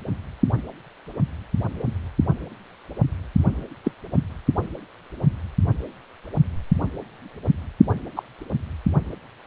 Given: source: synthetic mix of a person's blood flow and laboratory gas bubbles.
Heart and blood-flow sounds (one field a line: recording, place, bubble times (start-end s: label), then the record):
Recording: Doppler ultrasound of blood flow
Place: precordium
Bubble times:
3.85-3.91 s: bubbles
8.16-8.23 s: bubbles
From the record:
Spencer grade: 2 (many but less than half of the cardiac periods contain bubble signals, singularly or in groups)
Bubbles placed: only in the low amplitude regions of the cardiac cycle